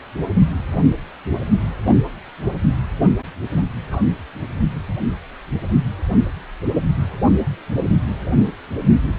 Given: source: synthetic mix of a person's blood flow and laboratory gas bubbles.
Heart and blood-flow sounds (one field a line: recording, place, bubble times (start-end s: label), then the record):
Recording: Doppler ultrasound of blood flow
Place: precordium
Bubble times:
0.86-0.96 s: bubbles
1.52-1.62 s: bubbles
1.85-1.95 s: bubbles
3.91-4.02 s: bubbles
From the record:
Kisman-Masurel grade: 121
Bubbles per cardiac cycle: 1 to 2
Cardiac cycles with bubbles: 10 to 50%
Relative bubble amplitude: barely perceptible (0.100 to 0.250)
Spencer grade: 2 (many but less than half of the cardiac periods contain bubble signals, singularly or in groups)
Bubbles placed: anywhere in the cardiac cycle